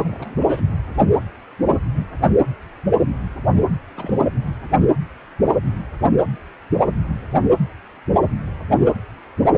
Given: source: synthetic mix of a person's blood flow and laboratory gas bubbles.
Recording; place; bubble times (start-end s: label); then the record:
Doppler ultrasound of blood flow; precordium
0.04-0.61 s: bubbles
3.96-4.17 s: bubbles
From the record:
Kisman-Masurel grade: 211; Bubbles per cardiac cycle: several, 3 to 8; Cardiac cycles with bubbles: 1 to 10%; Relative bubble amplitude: barely perceptible (0.100 to 0.250); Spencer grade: 1 (occasional bubble signal discernible with the cardiac motion signal, with majority of cardiac periods free of bubbles); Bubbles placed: anywhere in the cardiac cycle